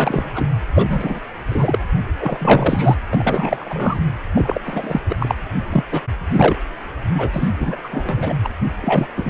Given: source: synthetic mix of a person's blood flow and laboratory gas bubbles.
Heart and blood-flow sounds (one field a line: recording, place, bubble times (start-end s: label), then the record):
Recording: Doppler ultrasound of blood flow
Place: precordium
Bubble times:
0.00-0.32 s: bubbles
0.35-0.49 s: bubbles
0.74-1.20 s: bubbles
1.48-1.78 s: bubbles
2.18-2.96 s: bubbles
3.10-4.00 s: bubbles
4.34-4.60 s: bubbles
4.65-5.01 s: bubbles
5.08-5.16 s: bubbles
5.20-5.35 s: bubbles
5.72-5.84 s: bubbles
5.91-6.02 s: bubbles
6.32-6.55 s: bubbles
7.14-7.50 s: bubbles
7.59-7.77 s: bubbles
7.83-8.37 s: bubbles
8.43-8.49 s: bubbles
8.81-9.08 s: bubbles
9.16-9.30 s: bubbles
From the record:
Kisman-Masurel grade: 343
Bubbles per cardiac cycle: rolling drumbeat, 9 or more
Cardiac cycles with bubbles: 100%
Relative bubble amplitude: loud (0.450 to 0.775)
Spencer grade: 3 (all of the cardiac periods contain showers or single bubble signals, but not dominating or overriding the cardiac motion signals)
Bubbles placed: anywhere in the cardiac cycle